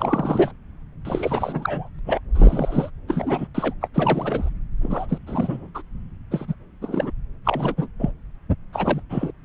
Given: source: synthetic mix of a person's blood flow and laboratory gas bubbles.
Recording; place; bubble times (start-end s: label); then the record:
Doppler ultrasound of blood flow; subclavian vein
0.00-0.51 s: bubbles
1.05-1.89 s: bubbles
2.05-2.20 s: bubbles
2.34-2.90 s: bubbles
3.07-3.47 s: bubbles
3.54-3.73 s: bubbles
3.81-3.88 s: bubbles
3.94-4.50 s: bubbles
4.81-5.18 s: bubbles
5.26-5.69 s: bubbles
5.75-5.82 s: bubbles
6.31-6.54 s: bubbles
6.81-7.11 s: bubbles
7.44-7.88 s: bubbles
7.99-8.11 s: bubbles
8.73-9.02 s: bubbles
9.10-9.31 s: bubbles
From the record:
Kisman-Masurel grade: 342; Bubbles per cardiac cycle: rolling drumbeat, 9 or more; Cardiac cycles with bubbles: 100%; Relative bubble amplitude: moderate (0.250 to 0.450); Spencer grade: 3 (all of the cardiac periods contain showers or single bubble signals, but not dominating or overriding the cardiac motion signals); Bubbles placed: anywhere in the cardiac cycle